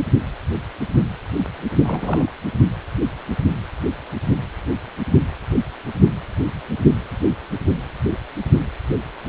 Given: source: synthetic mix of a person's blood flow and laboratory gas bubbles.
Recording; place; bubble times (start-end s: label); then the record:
Doppler ultrasound of blood flow; precordium
1.83-2.32 s: bubbles
From the record:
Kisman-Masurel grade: 212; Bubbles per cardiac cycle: several, 3 to 8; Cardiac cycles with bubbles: 1 to 10%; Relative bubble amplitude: moderate (0.250 to 0.450); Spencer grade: 1 (occasional bubble signal discernible with the cardiac motion signal, with majority of cardiac periods free of bubbles); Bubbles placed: only in the low amplitude regions of the cardiac cycle